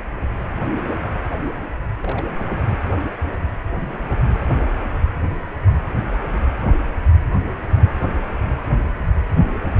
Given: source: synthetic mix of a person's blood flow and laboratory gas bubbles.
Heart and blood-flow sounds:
Doppler ultrasound of blood flow; precordium
2.00-2.62 s: bubbles
From the record:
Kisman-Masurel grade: 211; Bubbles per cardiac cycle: several, 3 to 8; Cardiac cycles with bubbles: 1 to 10%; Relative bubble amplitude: barely perceptible (0.100 to 0.250); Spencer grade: 1 (occasional bubble signal discernible with the cardiac motion signal, with majority of cardiac periods free of bubbles); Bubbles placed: anywhere in the cardiac cycle

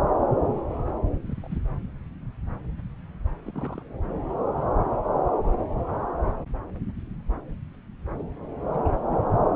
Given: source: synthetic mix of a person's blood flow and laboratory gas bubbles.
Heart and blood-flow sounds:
Doppler ultrasound of blood flow; subclavian vein
1.29-1.58 s: bubbles
3.44-3.83 s: bubbles
8.19-8.22 s: bubbles
8.72-9.20 s: bubbles
From the record:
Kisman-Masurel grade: 121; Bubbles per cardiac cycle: 1 to 2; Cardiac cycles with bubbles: 10 to 50%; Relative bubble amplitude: barely perceptible (0.100 to 0.250); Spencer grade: 2 (many but less than half of the cardiac periods contain bubble signals, singularly or in groups); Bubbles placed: anywhere in the cardiac cycle

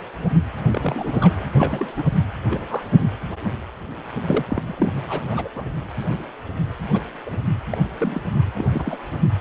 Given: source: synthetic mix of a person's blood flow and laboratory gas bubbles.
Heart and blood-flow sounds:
Doppler ultrasound of blood flow; precordium
0.65-1.46 s: bubbles
1.54-1.93 s: bubbles
1.96-2.04 s: bubbles
2.46-2.89 s: bubbles
4.25-4.45 s: bubbles
4.48-5.05 s: bubbles
5.08-5.22 s: bubbles
5.31-5.49 s: bubbles
5.55-5.71 s: bubbles
6.92-7.02 s: bubbles
7.26-7.38 s: bubbles
7.71-7.77 s: bubbles
7.99-8.21 s: bubbles
8.54-8.69 s: bubbles
8.72-9.00 s: bubbles
From the record:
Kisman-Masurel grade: 232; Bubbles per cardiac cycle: several, 3 to 8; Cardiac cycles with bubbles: 50 to 99%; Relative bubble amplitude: moderate (0.250 to 0.450); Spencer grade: 3 (all of the cardiac periods contain showers or single bubble signals, but not dominating or overriding the cardiac motion signals); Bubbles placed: anywhere in the cardiac cycle

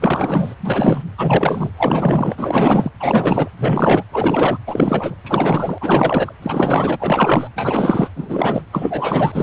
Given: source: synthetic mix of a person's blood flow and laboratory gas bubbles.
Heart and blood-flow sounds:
Doppler ultrasound of blood flow; precordium
0.00-0.54 s: bubbles
0.61-1.02 s: bubbles
1.17-1.70 s: bubbles
1.78-2.91 s: bubbles
3.00-3.50 s: bubbles
3.58-4.03 s: bubbles
4.12-4.58 s: bubbles
4.67-5.15 s: bubbles
5.24-6.33 s: bubbles
6.42-6.96 s: bubbles
6.99-7.50 s: bubbles
7.55-8.09 s: bubbles
8.15-8.62 s: bubbles
8.71-9.43 s: bubbles
From the record:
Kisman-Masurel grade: 444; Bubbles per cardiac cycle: continuous sound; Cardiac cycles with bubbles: 100%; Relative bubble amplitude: maximal (0.775 to 0.999); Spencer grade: 4 (maximum detectable bubble signal sounding continuously throughout systole and diastole of every cardiac period, and overriding the amplitude of the normal cardiac signals); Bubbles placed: anywhere in the cardiac cycle

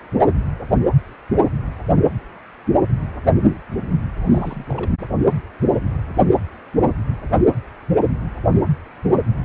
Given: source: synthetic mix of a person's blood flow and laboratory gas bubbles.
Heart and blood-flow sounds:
Doppler ultrasound of blood flow; precordium
4.27-4.64 s: bubbles
4.70-4.92 s: bubbles
From the record:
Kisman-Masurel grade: 211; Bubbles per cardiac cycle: several, 3 to 8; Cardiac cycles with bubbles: 1 to 10%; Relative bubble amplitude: barely perceptible (0.100 to 0.250); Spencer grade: 1 (occasional bubble signal discernible with the cardiac motion signal, with majority of cardiac periods free of bubbles); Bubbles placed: anywhere in the cardiac cycle

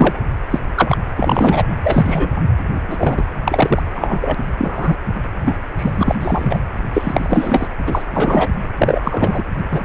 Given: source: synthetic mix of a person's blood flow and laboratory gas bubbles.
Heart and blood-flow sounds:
Doppler ultrasound of blood flow; precordium
0.00-0.20 s: bubbles
0.50-0.59 s: bubbles
0.76-0.97 s: bubbles
1.17-1.63 s: bubbles
1.83-2.43 s: bubbles
2.86-3.28 s: bubbles
3.45-3.82 s: bubbles
3.93-4.35 s: bubbles
4.58-4.96 s: bubbles
5.43-5.56 s: bubbles
5.77-6.15 s: bubbles
6.20-6.58 s: bubbles
6.94-7.68 s: bubbles
7.86-8.02 s: bubbles
8.10-8.50 s: bubbles
8.78-9.01 s: bubbles
9.04-9.44 s: bubbles
9.71-9.83 s: bubbles
From the record:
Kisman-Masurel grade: 243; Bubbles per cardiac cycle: several, 3 to 8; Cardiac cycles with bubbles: 100%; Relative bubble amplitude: loud (0.450 to 0.775); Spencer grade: 3 (all of the cardiac periods contain showers or single bubble signals, but not dominating or overriding the cardiac motion signals); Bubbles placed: anywhere in the cardiac cycle

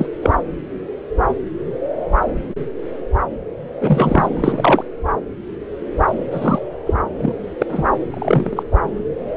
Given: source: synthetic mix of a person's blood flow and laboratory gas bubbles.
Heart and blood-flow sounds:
Doppler ultrasound of blood flow; subclavian vein
0.00-0.07 s: bubbles
0.21-0.30 s: bubbles
3.81-4.28 s: bubbles
4.31-4.83 s: bubbles
6.31-6.59 s: bubbles
6.86-6.94 s: bubbles
7.17-7.33 s: bubbles
7.58-7.66 s: bubbles
7.69-7.84 s: bubbles
8.13-8.63 s: bubbles
From the record:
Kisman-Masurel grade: 233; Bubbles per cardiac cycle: several, 3 to 8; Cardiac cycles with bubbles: 50 to 99%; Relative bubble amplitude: loud (0.450 to 0.775); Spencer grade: 3 (all of the cardiac periods contain showers or single bubble signals, but not dominating or overriding the cardiac motion signals); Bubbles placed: anywhere in the cardiac cycle

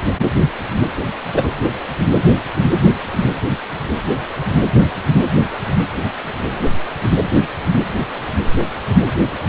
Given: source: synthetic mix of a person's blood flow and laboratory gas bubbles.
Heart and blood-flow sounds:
Doppler ultrasound of blood flow; precordium
1.33-1.48 s: bubbles
From the record:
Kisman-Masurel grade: 113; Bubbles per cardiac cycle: 1 to 2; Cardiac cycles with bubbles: 1 to 10%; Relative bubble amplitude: loud (0.450 to 0.775); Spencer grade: 1 (occasional bubble signal discernible with the cardiac motion signal, with majority of cardiac periods free of bubbles); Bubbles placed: anywhere in the cardiac cycle

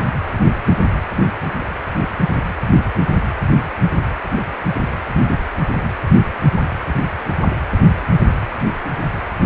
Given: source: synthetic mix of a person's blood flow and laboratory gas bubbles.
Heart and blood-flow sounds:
Doppler ultrasound of blood flow; precordium
no bubbles
From the record:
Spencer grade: 0 (complete lack of bubble signals)

